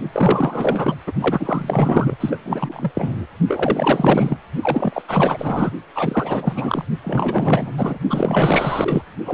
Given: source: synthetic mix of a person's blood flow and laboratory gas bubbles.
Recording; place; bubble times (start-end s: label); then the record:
Doppler ultrasound of blood flow; precordium
0.12-0.95 s: bubbles
1.06-1.12 s: bubbles
1.20-2.17 s: bubbles
2.20-2.39 s: bubbles
2.45-2.92 s: bubbles
2.94-3.27 s: bubbles
3.48-4.38 s: bubbles
4.62-5.02 s: bubbles
5.08-5.71 s: bubbles
5.94-6.85 s: bubbles
7.03-7.74 s: bubbles
7.77-7.98 s: bubbles
8.10-9.03 s: bubbles
9.25-9.34 s: bubbles
From the record:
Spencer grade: 4 (maximum detectable bubble signal sounding continuously throughout systole and diastole of every cardiac period, and overriding the amplitude of the normal cardiac signals); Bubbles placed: only in the low amplitude regions of the cardiac cycle